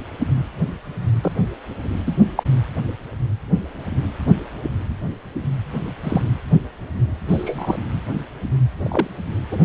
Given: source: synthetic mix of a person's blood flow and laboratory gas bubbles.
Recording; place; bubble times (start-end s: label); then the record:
Doppler ultrasound of blood flow; precordium
1.22-1.32 s: bubbles
2.06-2.13 s: bubbles
2.36-2.43 s: bubbles
6.03-6.22 s: bubbles
7.28-7.78 s: bubbles
8.83-9.08 s: bubbles
9.51-9.58 s: bubbles
From the record:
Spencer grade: 2 (many but less than half of the cardiac periods contain bubble signals, singularly or in groups); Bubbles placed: anywhere in the cardiac cycle